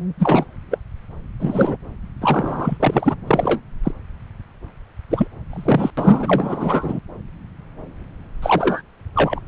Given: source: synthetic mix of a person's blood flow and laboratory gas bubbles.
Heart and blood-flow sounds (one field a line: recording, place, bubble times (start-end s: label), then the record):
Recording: Doppler ultrasound of blood flow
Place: subclavian vein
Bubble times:
0.19-0.44 s: bubbles
0.70-0.79 s: bubbles
1.40-1.76 s: bubbles
2.21-3.17 s: bubbles
3.27-3.60 s: bubbles
3.83-3.91 s: bubbles
5.10-5.27 s: bubbles
5.50-5.91 s: bubbles
5.97-7.00 s: bubbles
8.42-8.82 s: bubbles
9.14-9.40 s: bubbles
From the record:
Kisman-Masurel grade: 233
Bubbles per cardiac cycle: several, 3 to 8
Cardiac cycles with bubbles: 50 to 99%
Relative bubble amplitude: loud (0.450 to 0.775)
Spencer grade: 3 (all of the cardiac periods contain showers or single bubble signals, but not dominating or overriding the cardiac motion signals)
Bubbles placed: anywhere in the cardiac cycle